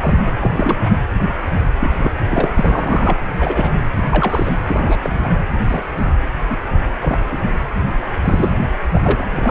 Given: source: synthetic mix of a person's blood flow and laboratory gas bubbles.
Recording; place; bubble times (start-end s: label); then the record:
Doppler ultrasound of blood flow; precordium
0.02-0.15 s: bubbles
0.41-0.95 s: bubbles
1.80-2.11 s: bubbles
2.28-2.51 s: bubbles
2.56-3.17 s: bubbles
3.39-3.74 s: bubbles
3.96-4.04 s: bubbles
4.11-4.50 s: bubbles
4.67-5.30 s: bubbles
5.68-5.85 s: bubbles
5.97-6.12 s: bubbles
6.50-6.57 s: bubbles
6.99-7.41 s: bubbles
8.22-8.52 s: bubbles
8.93-9.33 s: bubbles
9.36-9.51 s: bubbles
From the record:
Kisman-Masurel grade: 232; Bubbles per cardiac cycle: several, 3 to 8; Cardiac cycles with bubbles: 50 to 99%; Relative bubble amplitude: moderate (0.250 to 0.450); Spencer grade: 3 (all of the cardiac periods contain showers or single bubble signals, but not dominating or overriding the cardiac motion signals); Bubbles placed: anywhere in the cardiac cycle